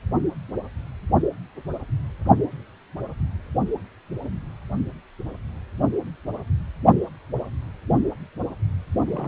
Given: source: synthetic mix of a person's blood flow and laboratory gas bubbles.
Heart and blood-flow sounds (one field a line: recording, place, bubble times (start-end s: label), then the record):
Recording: Doppler ultrasound of blood flow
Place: precordium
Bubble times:
9.06-9.28 s: bubbles
From the record:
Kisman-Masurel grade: 211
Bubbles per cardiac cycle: several, 3 to 8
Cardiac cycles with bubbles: 1 to 10%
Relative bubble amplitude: barely perceptible (0.100 to 0.250)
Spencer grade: 1 (occasional bubble signal discernible with the cardiac motion signal, with majority of cardiac periods free of bubbles)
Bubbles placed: only in the low amplitude regions of the cardiac cycle